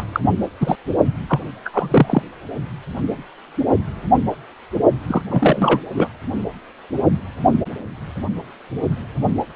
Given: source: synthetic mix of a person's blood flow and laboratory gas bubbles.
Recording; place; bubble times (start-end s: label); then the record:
Doppler ultrasound of blood flow; precordium
0.00-0.05 s: bubbles
0.13-0.20 s: bubbles
0.60-0.75 s: bubbles
1.28-1.40 s: bubbles
1.65-1.70 s: bubbles
1.73-2.23 s: bubbles
5.08-5.22 s: bubbles
5.30-5.80 s: bubbles
5.95-6.08 s: bubbles
From the record:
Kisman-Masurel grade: 233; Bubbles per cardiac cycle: several, 3 to 8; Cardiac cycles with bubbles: 50 to 99%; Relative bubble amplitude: loud (0.450 to 0.775); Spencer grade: 3 (all of the cardiac periods contain showers or single bubble signals, but not dominating or overriding the cardiac motion signals); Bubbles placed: only in the low amplitude regions of the cardiac cycle